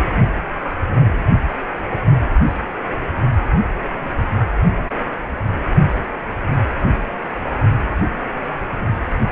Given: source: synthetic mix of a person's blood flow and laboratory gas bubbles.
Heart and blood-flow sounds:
Doppler ultrasound of blood flow; precordium
no bubbles
From the record:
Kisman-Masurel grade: 000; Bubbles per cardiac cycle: 0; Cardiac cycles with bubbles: 0%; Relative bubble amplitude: no bubbles discernible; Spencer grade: 0 (complete lack of bubble signals)

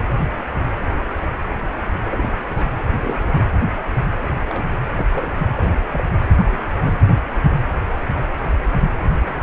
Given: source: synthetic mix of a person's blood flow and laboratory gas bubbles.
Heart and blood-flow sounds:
Doppler ultrasound of blood flow; precordium
2.12-2.66 s: bubbles
2.81-3.44 s: bubbles
4.22-4.41 s: bubbles
4.49-4.63 s: bubbles
4.96-5.06 s: bubbles
5.12-5.30 s: bubbles
5.55-5.71 s: bubbles
5.80-5.86 s: bubbles
5.91-6.01 s: bubbles
6.39-6.59 s: bubbles
6.66-6.69 s: bubbles
6.78-6.98 s: bubbles
From the record:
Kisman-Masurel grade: 221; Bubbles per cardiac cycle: several, 3 to 8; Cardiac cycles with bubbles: 10 to 50%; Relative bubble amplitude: barely perceptible (0.100 to 0.250); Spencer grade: 2 (many but less than half of the cardiac periods contain bubble signals, singularly or in groups); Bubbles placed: anywhere in the cardiac cycle

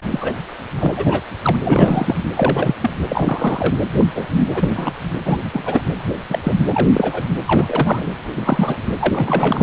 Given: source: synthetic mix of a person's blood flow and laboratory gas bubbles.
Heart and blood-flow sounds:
Doppler ultrasound of blood flow; precordium
0.11-0.33 s: bubbles
0.78-0.94 s: bubbles
0.96-1.21 s: bubbles
1.42-1.56 s: bubbles
1.65-2.16 s: bubbles
2.35-2.75 s: bubbles
2.80-2.90 s: bubbles
3.08-3.75 s: bubbles
3.98-4.05 s: bubbles
4.15-4.26 s: bubbles
4.33-4.48 s: bubbles
4.54-4.92 s: bubbles
5.25-5.38 s: bubbles
5.52-5.81 s: bubbles
6.29-6.39 s: bubbles
6.43-6.55 s: bubbles
6.69-6.88 s: bubbles
6.92-7.22 s: bubbles
7.47-8.07 s: bubbles
8.35-8.78 s: bubbles
9.00-9.63 s: bubbles
From the record:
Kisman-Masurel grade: 232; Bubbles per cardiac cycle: several, 3 to 8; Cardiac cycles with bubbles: 50 to 99%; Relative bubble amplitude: moderate (0.250 to 0.450); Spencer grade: 3 (all of the cardiac periods contain showers or single bubble signals, but not dominating or overriding the cardiac motion signals); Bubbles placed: anywhere in the cardiac cycle

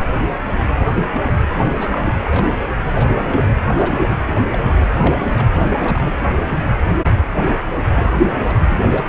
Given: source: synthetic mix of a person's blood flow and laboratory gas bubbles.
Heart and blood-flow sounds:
Doppler ultrasound of blood flow; precordium
0.78-0.89 s: bubbles
0.98-1.05 s: bubbles
1.12-1.22 s: bubbles
1.27-1.31 s: bubbles
1.78-2.13 s: bubbles
2.22-2.47 s: bubbles
2.92-3.12 s: bubbles
3.17-3.59 s: bubbles
3.75-4.17 s: bubbles
4.27-4.33 s: bubbles
4.51-4.83 s: bubbles
5.00-5.17 s: bubbles
5.22-5.50 s: bubbles
5.54-6.14 s: bubbles
6.39-6.44 s: bubbles
6.47-6.59 s: bubbles
7.94-8.43 s: bubbles
8.46-8.59 s: bubbles
8.66-8.77 s: bubbles
8.84-9.05 s: bubbles
From the record:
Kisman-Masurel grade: 232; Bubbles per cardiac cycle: several, 3 to 8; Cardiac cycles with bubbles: 50 to 99%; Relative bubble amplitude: moderate (0.250 to 0.450); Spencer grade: 3 (all of the cardiac periods contain showers or single bubble signals, but not dominating or overriding the cardiac motion signals); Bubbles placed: anywhere in the cardiac cycle

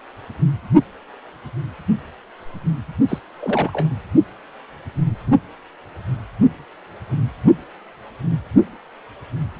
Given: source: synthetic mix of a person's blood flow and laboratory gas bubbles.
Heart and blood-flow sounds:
Doppler ultrasound of blood flow; precordium
3.08-3.19 s: bubbles
3.40-3.96 s: bubbles
From the record:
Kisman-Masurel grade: 212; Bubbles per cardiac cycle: several, 3 to 8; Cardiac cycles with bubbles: 1 to 10%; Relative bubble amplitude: moderate (0.250 to 0.450); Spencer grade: 1 (occasional bubble signal discernible with the cardiac motion signal, with majority of cardiac periods free of bubbles); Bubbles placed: only in the low amplitude regions of the cardiac cycle

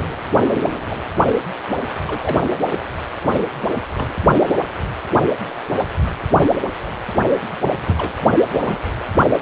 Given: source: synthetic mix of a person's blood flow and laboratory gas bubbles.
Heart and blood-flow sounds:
Doppler ultrasound of blood flow; precordium
0.90-0.97 s: bubbles
2.07-2.37 s: bubbles
3.95-4.13 s: bubbles
7.86-8.12 s: bubbles
8.53-8.79 s: bubbles
From the record:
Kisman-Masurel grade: 121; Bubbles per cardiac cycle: 1 to 2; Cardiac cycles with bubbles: 10 to 50%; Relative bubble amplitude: barely perceptible (0.100 to 0.250); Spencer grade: 2 (many but less than half of the cardiac periods contain bubble signals, singularly or in groups); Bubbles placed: anywhere in the cardiac cycle

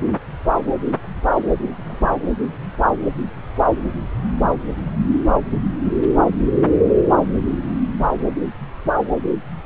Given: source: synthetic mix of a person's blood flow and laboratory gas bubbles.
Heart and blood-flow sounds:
Doppler ultrasound of blood flow; subclavian vein
1.77-2.08 s: bubbles
From the record:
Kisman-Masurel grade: 122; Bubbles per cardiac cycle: 1 to 2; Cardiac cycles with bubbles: 10 to 50%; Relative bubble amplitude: moderate (0.250 to 0.450); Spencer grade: 2 (many but less than half of the cardiac periods contain bubble signals, singularly or in groups); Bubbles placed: anywhere in the cardiac cycle

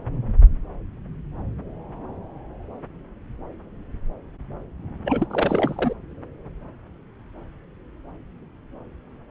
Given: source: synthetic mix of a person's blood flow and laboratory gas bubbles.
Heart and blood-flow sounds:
Doppler ultrasound of blood flow; subclavian vein
5.05-5.26 s: bubbles
5.30-5.94 s: bubbles
From the record:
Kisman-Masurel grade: 212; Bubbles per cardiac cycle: several, 3 to 8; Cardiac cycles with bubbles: 1 to 10%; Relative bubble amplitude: moderate (0.250 to 0.450); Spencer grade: 1 (occasional bubble signal discernible with the cardiac motion signal, with majority of cardiac periods free of bubbles); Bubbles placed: anywhere in the cardiac cycle

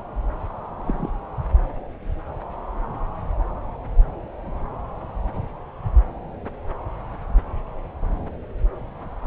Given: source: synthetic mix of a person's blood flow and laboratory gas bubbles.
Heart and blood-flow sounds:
Doppler ultrasound of blood flow; subclavian vein
0.84-1.08 s: bubbles
From the record:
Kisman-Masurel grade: 111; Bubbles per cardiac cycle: 1 to 2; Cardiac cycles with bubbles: 1 to 10%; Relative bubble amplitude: barely perceptible (0.100 to 0.250); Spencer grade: 1 (occasional bubble signal discernible with the cardiac motion signal, with majority of cardiac periods free of bubbles); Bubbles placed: anywhere in the cardiac cycle

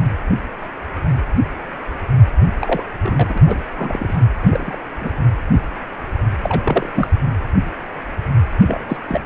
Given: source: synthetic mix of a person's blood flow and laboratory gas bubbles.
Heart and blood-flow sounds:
Doppler ultrasound of blood flow; precordium
2.59-2.83 s: bubbles
3.02-3.55 s: bubbles
3.76-4.25 s: bubbles
4.41-4.79 s: bubbles
5.01-5.11 s: bubbles
6.43-6.62 s: bubbles
6.65-6.88 s: bubbles
6.94-7.08 s: bubbles
8.67-8.83 s: bubbles
8.89-8.97 s: bubbles
9.08-9.21 s: bubbles
From the record:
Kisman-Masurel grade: 232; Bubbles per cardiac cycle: several, 3 to 8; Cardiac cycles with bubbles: 50 to 99%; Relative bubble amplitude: moderate (0.250 to 0.450); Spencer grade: 3 (all of the cardiac periods contain showers or single bubble signals, but not dominating or overriding the cardiac motion signals); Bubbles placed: anywhere in the cardiac cycle

